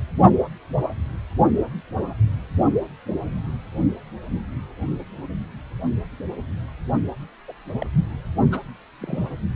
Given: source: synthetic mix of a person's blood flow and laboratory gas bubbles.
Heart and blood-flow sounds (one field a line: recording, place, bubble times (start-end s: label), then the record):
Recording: Doppler ultrasound of blood flow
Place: precordium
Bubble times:
7.48-7.52 s: bubbles
7.80-7.87 s: bubbles
8.51-8.60 s: bubbles
8.98-9.33 s: bubbles
From the record:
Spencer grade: 2 (many but less than half of the cardiac periods contain bubble signals, singularly or in groups)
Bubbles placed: only in the low amplitude regions of the cardiac cycle